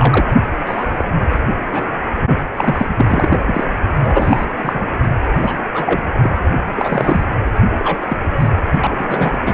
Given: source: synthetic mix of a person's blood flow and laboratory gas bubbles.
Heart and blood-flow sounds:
Doppler ultrasound of blood flow; precordium
0.00-0.33 s: bubbles
0.66-0.85 s: bubbles
0.97-1.05 s: bubbles
1.72-1.86 s: bubbles
2.56-2.86 s: bubbles
2.88-3.64 s: bubbles
4.02-4.46 s: bubbles
4.62-4.88 s: bubbles
5.41-5.62 s: bubbles
5.73-6.10 s: bubbles
6.23-6.41 s: bubbles
6.75-7.24 s: bubbles
7.79-7.98 s: bubbles
8.08-8.18 s: bubbles
8.39-8.48 s: bubbles
8.80-9.38 s: bubbles
9.40-9.54 s: bubbles
From the record:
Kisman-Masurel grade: 243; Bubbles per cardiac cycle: several, 3 to 8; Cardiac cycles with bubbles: 100%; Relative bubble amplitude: loud (0.450 to 0.775); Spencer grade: 3 (all of the cardiac periods contain showers or single bubble signals, but not dominating or overriding the cardiac motion signals); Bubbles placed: only in the low amplitude regions of the cardiac cycle

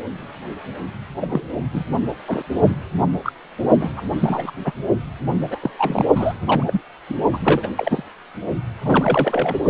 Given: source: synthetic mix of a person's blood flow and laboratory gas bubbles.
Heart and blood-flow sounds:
Doppler ultrasound of blood flow; precordium
1.21-1.44 s: bubbles
1.73-1.84 s: bubbles
2.27-2.45 s: bubbles
3.24-3.33 s: bubbles
3.80-4.02 s: bubbles
4.18-4.51 s: bubbles
4.65-4.72 s: bubbles
5.50-5.59 s: bubbles
5.62-5.71 s: bubbles
5.78-6.05 s: bubbles
6.15-6.33 s: bubbles
6.46-6.63 s: bubbles
6.67-6.81 s: bubbles
7.09-7.14 s: bubbles
7.33-7.38 s: bubbles
7.44-7.68 s: bubbles
7.77-8.03 s: bubbles
8.84-9.58 s: bubbles
From the record:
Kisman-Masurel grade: 242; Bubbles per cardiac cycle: several, 3 to 8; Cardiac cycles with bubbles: 100%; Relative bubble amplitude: moderate (0.250 to 0.450); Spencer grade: 3 (all of the cardiac periods contain showers or single bubble signals, but not dominating or overriding the cardiac motion signals); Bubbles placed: only in the low amplitude regions of the cardiac cycle

